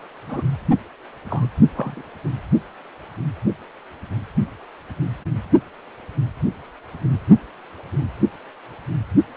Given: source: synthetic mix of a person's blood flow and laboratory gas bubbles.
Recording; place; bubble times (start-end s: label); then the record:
Doppler ultrasound of blood flow; precordium
0.27-0.46 s: bubbles
1.29-1.46 s: bubbles
1.75-2.01 s: bubbles
From the record:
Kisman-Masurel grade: 122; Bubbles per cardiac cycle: 1 to 2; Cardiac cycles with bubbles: 10 to 50%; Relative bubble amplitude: moderate (0.250 to 0.450); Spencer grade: 2 (many but less than half of the cardiac periods contain bubble signals, singularly or in groups); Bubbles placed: only in the low amplitude regions of the cardiac cycle